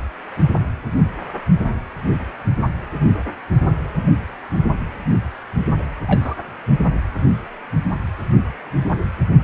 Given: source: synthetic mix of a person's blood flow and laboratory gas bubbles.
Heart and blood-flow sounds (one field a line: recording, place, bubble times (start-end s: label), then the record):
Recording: Doppler ultrasound of blood flow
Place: precordium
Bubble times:
6.07-6.35 s: bubbles
From the record:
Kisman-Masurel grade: 112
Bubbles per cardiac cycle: 1 to 2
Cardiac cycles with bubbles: 1 to 10%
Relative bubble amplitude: moderate (0.250 to 0.450)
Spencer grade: 1 (occasional bubble signal discernible with the cardiac motion signal, with majority of cardiac periods free of bubbles)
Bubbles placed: anywhere in the cardiac cycle